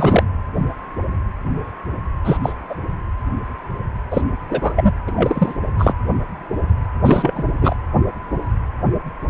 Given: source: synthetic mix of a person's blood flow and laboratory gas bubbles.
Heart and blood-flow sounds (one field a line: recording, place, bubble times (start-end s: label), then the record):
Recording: Doppler ultrasound of blood flow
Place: precordium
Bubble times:
0.00-0.24 s: bubbles
2.24-2.38 s: bubbles
2.43-2.56 s: bubbles
2.69-2.75 s: bubbles
4.10-4.22 s: bubbles
4.49-4.92 s: bubbles
5.07-5.12 s: bubbles
5.15-5.54 s: bubbles
5.78-5.94 s: bubbles
7.03-7.44 s: bubbles
7.61-7.76 s: bubbles
From the record:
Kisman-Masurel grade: 233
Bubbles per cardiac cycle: several, 3 to 8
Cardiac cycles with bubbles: 50 to 99%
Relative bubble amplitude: loud (0.450 to 0.775)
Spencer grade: 3 (all of the cardiac periods contain showers or single bubble signals, but not dominating or overriding the cardiac motion signals)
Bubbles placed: anywhere in the cardiac cycle